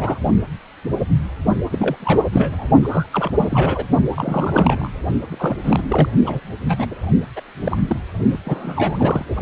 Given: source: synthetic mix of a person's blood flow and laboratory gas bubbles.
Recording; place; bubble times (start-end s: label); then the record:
Doppler ultrasound of blood flow; precordium
0.00-0.18 s: bubbles
1.72-1.96 s: bubbles
2.00-2.29 s: bubbles
2.33-2.68 s: bubbles
2.83-3.06 s: bubbles
3.12-3.31 s: bubbles
3.38-3.86 s: bubbles
4.15-4.88 s: bubbles
5.28-5.83 s: bubbles
5.88-6.09 s: bubbles
6.24-6.40 s: bubbles
6.68-6.86 s: bubbles
6.90-6.95 s: bubbles
7.36-7.41 s: bubbles
7.62-7.77 s: bubbles
7.87-7.96 s: bubbles
8.32-8.38 s: bubbles
8.45-9.25 s: bubbles
9.28-9.40 s: bubbles
From the record:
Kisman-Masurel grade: 332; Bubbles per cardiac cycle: rolling drumbeat, 9 or more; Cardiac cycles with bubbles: 50 to 99%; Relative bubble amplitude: moderate (0.250 to 0.450); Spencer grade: 3 (all of the cardiac periods contain showers or single bubble signals, but not dominating or overriding the cardiac motion signals); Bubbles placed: only in the low amplitude regions of the cardiac cycle